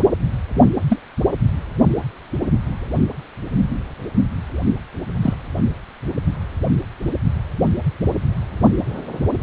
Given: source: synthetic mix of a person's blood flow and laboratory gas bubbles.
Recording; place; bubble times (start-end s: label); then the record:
Doppler ultrasound of blood flow; precordium
0.55-0.61 s: bubbles
0.88-0.99 s: bubbles
5.21-5.34 s: bubbles
From the record:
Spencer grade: 2 (many but less than half of the cardiac periods contain bubble signals, singularly or in groups); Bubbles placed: anywhere in the cardiac cycle